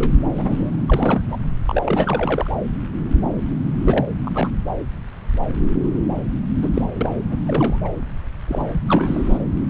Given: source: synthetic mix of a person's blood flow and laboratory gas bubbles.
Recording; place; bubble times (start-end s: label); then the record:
Doppler ultrasound of blood flow; subclavian vein
0.00-0.20 s: bubbles
0.38-0.76 s: bubbles
0.88-1.22 s: bubbles
1.28-1.36 s: bubbles
1.66-2.50 s: bubbles
3.84-4.05 s: bubbles
4.25-4.48 s: bubbles
6.62-6.70 s: bubbles
6.74-6.82 s: bubbles
6.96-7.10 s: bubbles
7.30-7.37 s: bubbles
7.47-7.79 s: bubbles
7.84-7.89 s: bubbles
8.48-8.79 s: bubbles
8.86-9.38 s: bubbles
From the record:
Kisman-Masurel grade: 232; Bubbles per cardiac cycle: several, 3 to 8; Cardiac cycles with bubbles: 50 to 99%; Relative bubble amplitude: moderate (0.250 to 0.450); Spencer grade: 3 (all of the cardiac periods contain showers or single bubble signals, but not dominating or overriding the cardiac motion signals); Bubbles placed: anywhere in the cardiac cycle